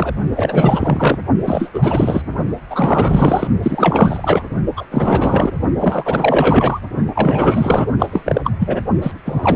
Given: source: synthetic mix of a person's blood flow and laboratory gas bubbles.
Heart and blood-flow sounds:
Doppler ultrasound of blood flow; precordium
0.00-0.13 s: bubbles
0.35-1.17 s: bubbles
1.44-1.70 s: bubbles
1.73-2.22 s: bubbles
2.70-3.48 s: bubbles
3.62-4.44 s: bubbles
4.76-4.85 s: bubbles
4.91-5.52 s: bubbles
5.79-6.79 s: bubbles
7.15-7.87 s: bubbles
7.98-8.51 s: bubbles
8.59-8.81 s: bubbles
9.01-9.12 s: bubbles
9.25-9.56 s: bubbles
From the record:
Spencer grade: 4 (maximum detectable bubble signal sounding continuously throughout systole and diastole of every cardiac period, and overriding the amplitude of the normal cardiac signals); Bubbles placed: only in the low amplitude regions of the cardiac cycle

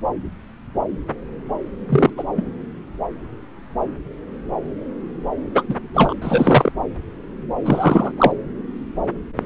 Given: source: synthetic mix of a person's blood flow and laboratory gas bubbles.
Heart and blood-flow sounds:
Doppler ultrasound of blood flow; subclavian vein
1.89-2.10 s: bubbles
2.17-2.24 s: bubbles
2.37-2.44 s: bubbles
5.55-5.63 s: bubbles
5.69-5.75 s: bubbles
5.94-6.13 s: bubbles
6.21-6.72 s: bubbles
7.64-8.12 s: bubbles
8.18-8.31 s: bubbles
From the record:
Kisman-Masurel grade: 223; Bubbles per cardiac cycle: several, 3 to 8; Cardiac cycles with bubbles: 10 to 50%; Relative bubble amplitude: loud (0.450 to 0.775); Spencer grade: 2 (many but less than half of the cardiac periods contain bubble signals, singularly or in groups); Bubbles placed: anywhere in the cardiac cycle

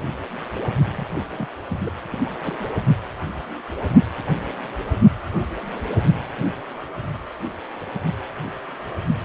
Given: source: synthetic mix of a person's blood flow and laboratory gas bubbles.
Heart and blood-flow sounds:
Doppler ultrasound of blood flow; precordium
0.96-1.08 s: bubbles
1.32-1.46 s: bubbles
1.81-1.90 s: bubbles
2.08-2.20 s: bubbles
2.25-2.30 s: bubbles
2.41-2.69 s: bubbles
From the record:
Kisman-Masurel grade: 211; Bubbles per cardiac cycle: several, 3 to 8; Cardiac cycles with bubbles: 1 to 10%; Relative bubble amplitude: barely perceptible (0.100 to 0.250); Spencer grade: 1 (occasional bubble signal discernible with the cardiac motion signal, with majority of cardiac periods free of bubbles); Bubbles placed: only in the low amplitude regions of the cardiac cycle

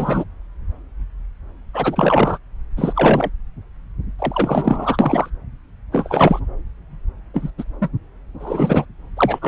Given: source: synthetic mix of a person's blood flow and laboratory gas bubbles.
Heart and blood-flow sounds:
Doppler ultrasound of blood flow; subclavian vein
0.00-0.24 s: bubbles
1.73-2.38 s: bubbles
2.77-3.29 s: bubbles
4.18-5.29 s: bubbles
5.92-6.39 s: bubbles
7.33-7.50 s: bubbles
7.58-7.64 s: bubbles
7.82-7.89 s: bubbles
8.40-8.86 s: bubbles
9.17-9.39 s: bubbles
9.42-9.48 s: bubbles
From the record:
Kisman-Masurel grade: 233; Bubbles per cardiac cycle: several, 3 to 8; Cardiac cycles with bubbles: 50 to 99%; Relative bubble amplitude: loud (0.450 to 0.775); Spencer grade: 3 (all of the cardiac periods contain showers or single bubble signals, but not dominating or overriding the cardiac motion signals); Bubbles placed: anywhere in the cardiac cycle

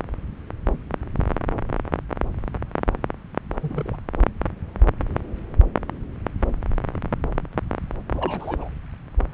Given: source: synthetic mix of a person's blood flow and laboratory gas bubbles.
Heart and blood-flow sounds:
Doppler ultrasound of blood flow; subclavian vein
3.62-3.96 s: bubbles
8.13-8.69 s: bubbles
From the record:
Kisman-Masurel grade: 211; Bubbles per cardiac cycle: several, 3 to 8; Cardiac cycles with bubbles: 1 to 10%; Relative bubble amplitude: barely perceptible (0.100 to 0.250); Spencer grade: 1 (occasional bubble signal discernible with the cardiac motion signal, with majority of cardiac periods free of bubbles); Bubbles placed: anywhere in the cardiac cycle

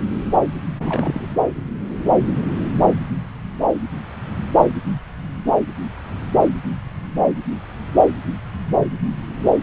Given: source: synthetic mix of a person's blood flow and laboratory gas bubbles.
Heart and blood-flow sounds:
Doppler ultrasound of blood flow; subclavian vein
0.80-1.36 s: bubbles
From the record:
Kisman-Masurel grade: 212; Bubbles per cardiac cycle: several, 3 to 8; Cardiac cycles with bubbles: 1 to 10%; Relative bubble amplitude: moderate (0.250 to 0.450); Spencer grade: 1 (occasional bubble signal discernible with the cardiac motion signal, with majority of cardiac periods free of bubbles); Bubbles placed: anywhere in the cardiac cycle

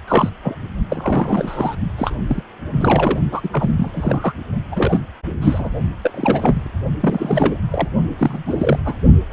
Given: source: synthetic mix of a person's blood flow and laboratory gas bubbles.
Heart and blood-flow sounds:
Doppler ultrasound of blood flow; precordium
0.07-0.29 s: bubbles
0.42-0.56 s: bubbles
0.90-1.76 s: bubbles
1.98-2.15 s: bubbles
2.27-2.42 s: bubbles
2.72-3.20 s: bubbles
3.31-3.40 s: bubbles
3.44-3.49 s: bubbles
3.52-3.70 s: bubbles
3.77-4.35 s: bubbles
4.71-5.00 s: bubbles
5.41-5.70 s: bubbles
6.02-6.12 s: bubbles
6.14-6.71 s: bubbles
7.00-7.58 s: bubbles
7.71-7.88 s: bubbles
8.18-8.44 s: bubbles
8.46-8.79 s: bubbles
8.85-8.94 s: bubbles
9.29-9.33 s: bubbles
From the record:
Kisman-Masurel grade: 342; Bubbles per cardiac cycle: rolling drumbeat, 9 or more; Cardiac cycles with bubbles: 100%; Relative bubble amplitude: moderate (0.250 to 0.450); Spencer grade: 3 (all of the cardiac periods contain showers or single bubble signals, but not dominating or overriding the cardiac motion signals); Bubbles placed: only in the low amplitude regions of the cardiac cycle

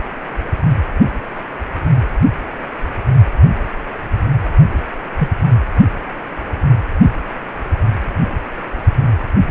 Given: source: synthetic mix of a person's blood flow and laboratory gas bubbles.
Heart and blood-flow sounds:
Doppler ultrasound of blood flow; precordium
5.18-5.29 s: bubbles
From the record:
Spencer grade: 1 (occasional bubble signal discernible with the cardiac motion signal, with majority of cardiac periods free of bubbles); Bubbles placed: anywhere in the cardiac cycle

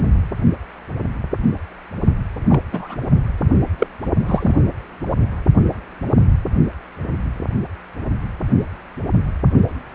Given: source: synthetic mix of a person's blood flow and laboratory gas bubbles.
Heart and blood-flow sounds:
Doppler ultrasound of blood flow; precordium
2.48-2.60 s: bubbles
2.71-2.96 s: bubbles
3.79-3.87 s: bubbles
4.26-4.55 s: bubbles
From the record:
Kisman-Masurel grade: 123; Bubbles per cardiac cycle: 1 to 2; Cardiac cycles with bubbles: 10 to 50%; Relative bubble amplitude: loud (0.450 to 0.775); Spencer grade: 2 (many but less than half of the cardiac periods contain bubble signals, singularly or in groups); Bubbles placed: only in the low amplitude regions of the cardiac cycle

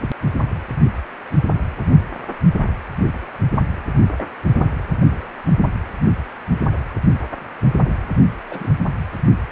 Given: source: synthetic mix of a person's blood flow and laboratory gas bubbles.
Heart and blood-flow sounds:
Doppler ultrasound of blood flow; precordium
4.17-4.24 s: bubbles
4.61-4.66 s: bubbles
5.03-5.26 s: bubbles
7.86-8.05 s: bubbles
8.50-8.71 s: bubbles
From the record:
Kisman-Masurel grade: 121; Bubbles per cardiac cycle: 1 to 2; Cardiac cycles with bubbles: 10 to 50%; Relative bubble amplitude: barely perceptible (0.100 to 0.250); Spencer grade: 2 (many but less than half of the cardiac periods contain bubble signals, singularly or in groups); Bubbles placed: anywhere in the cardiac cycle

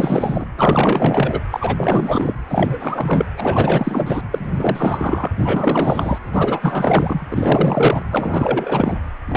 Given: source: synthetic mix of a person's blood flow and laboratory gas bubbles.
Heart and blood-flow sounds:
Doppler ultrasound of blood flow; precordium
0.00-0.46 s: bubbles
0.57-1.40 s: bubbles
1.50-2.34 s: bubbles
2.48-3.30 s: bubbles
3.37-4.21 s: bubbles
4.30-5.28 s: bubbles
5.37-6.19 s: bubbles
6.32-7.27 s: bubbles
7.30-8.03 s: bubbles
8.12-8.96 s: bubbles
9.26-9.37 s: bubbles
From the record:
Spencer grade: 4 (maximum detectable bubble signal sounding continuously throughout systole and diastole of every cardiac period, and overriding the amplitude of the normal cardiac signals); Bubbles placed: anywhere in the cardiac cycle

